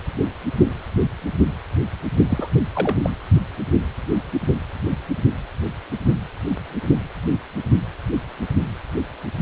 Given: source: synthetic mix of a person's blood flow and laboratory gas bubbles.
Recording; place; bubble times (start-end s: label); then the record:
Doppler ultrasound of blood flow; precordium
2.28-2.48 s: bubbles
2.74-2.95 s: bubbles
3.02-3.17 s: bubbles
From the record:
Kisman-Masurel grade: 212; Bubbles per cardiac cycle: several, 3 to 8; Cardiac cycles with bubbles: 1 to 10%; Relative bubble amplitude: moderate (0.250 to 0.450); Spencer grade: 1 (occasional bubble signal discernible with the cardiac motion signal, with majority of cardiac periods free of bubbles); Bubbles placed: only in the low amplitude regions of the cardiac cycle